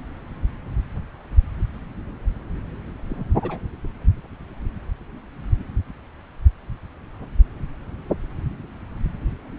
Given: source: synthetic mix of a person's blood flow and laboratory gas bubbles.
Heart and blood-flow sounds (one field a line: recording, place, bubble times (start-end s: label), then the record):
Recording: Doppler ultrasound of blood flow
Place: subclavian vein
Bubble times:
3.09-3.25 s: bubbles
3.42-3.58 s: bubbles
From the record:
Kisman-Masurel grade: 111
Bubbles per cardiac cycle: 1 to 2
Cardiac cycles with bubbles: 1 to 10%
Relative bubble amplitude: barely perceptible (0.100 to 0.250)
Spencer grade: 1 (occasional bubble signal discernible with the cardiac motion signal, with majority of cardiac periods free of bubbles)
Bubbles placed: anywhere in the cardiac cycle